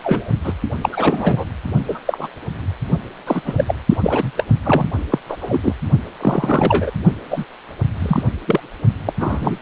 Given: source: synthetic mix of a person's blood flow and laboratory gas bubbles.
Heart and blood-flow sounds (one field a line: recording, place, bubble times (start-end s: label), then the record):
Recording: Doppler ultrasound of blood flow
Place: precordium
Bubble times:
0.04-0.31 s: bubbles
0.44-0.53 s: bubbles
0.81-0.89 s: bubbles
0.92-1.45 s: bubbles
1.88-1.99 s: bubbles
2.06-2.29 s: bubbles
3.27-3.42 s: bubbles
3.46-3.75 s: bubbles
3.90-3.97 s: bubbles
4.02-4.31 s: bubbles
4.37-4.44 s: bubbles
4.64-4.85 s: bubbles
5.11-5.19 s: bubbles
5.29-5.36 s: bubbles
5.41-5.73 s: bubbles
6.20-6.91 s: bubbles
7.30-7.44 s: bubbles
7.99-8.23 s: bubbles
8.47-8.60 s: bubbles
9.05-9.13 s: bubbles
9.19-9.59 s: bubbles
From the record:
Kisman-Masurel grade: 243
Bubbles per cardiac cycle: several, 3 to 8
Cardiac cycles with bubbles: 100%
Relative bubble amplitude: loud (0.450 to 0.775)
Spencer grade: 3 (all of the cardiac periods contain showers or single bubble signals, but not dominating or overriding the cardiac motion signals)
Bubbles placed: only in the low amplitude regions of the cardiac cycle